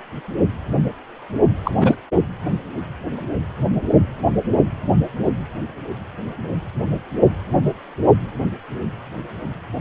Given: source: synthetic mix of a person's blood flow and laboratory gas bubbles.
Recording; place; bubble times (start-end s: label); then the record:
Doppler ultrasound of blood flow; precordium
1.64-1.71 s: bubbles
1.78-1.95 s: bubbles
From the record:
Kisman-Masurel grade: 212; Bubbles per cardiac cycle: several, 3 to 8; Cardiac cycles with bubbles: 1 to 10%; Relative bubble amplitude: moderate (0.250 to 0.450); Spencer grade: 1 (occasional bubble signal discernible with the cardiac motion signal, with majority of cardiac periods free of bubbles); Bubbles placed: anywhere in the cardiac cycle